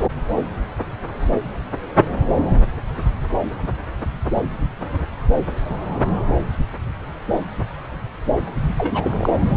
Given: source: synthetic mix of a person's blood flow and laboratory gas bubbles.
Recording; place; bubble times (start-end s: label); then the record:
Doppler ultrasound of blood flow; subclavian vein
8.75-9.34 s: bubbles
From the record:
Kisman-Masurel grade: 212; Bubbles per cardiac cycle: several, 3 to 8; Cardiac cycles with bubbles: 1 to 10%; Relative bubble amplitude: moderate (0.250 to 0.450); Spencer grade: 1 (occasional bubble signal discernible with the cardiac motion signal, with majority of cardiac periods free of bubbles); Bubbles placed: anywhere in the cardiac cycle